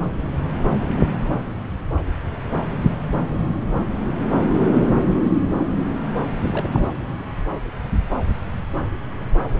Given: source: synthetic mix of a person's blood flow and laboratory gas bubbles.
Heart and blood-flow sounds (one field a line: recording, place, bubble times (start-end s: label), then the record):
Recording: Doppler ultrasound of blood flow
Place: subclavian vein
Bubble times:
6.37-6.86 s: bubbles
From the record:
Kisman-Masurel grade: 221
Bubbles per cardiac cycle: several, 3 to 8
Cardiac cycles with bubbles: 10 to 50%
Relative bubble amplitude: barely perceptible (0.100 to 0.250)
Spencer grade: 2 (many but less than half of the cardiac periods contain bubble signals, singularly or in groups)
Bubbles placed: anywhere in the cardiac cycle